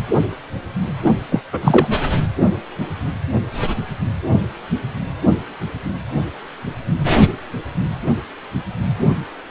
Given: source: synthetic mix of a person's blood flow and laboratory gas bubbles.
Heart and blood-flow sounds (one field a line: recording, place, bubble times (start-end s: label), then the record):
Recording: Doppler ultrasound of blood flow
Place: precordium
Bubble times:
1.04-1.12 s: bubbles
1.31-1.42 s: bubbles
1.52-1.88 s: bubbles
From the record:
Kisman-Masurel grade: 213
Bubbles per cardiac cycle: several, 3 to 8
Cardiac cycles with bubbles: 1 to 10%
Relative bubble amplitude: loud (0.450 to 0.775)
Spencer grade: 1 (occasional bubble signal discernible with the cardiac motion signal, with majority of cardiac periods free of bubbles)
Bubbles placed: anywhere in the cardiac cycle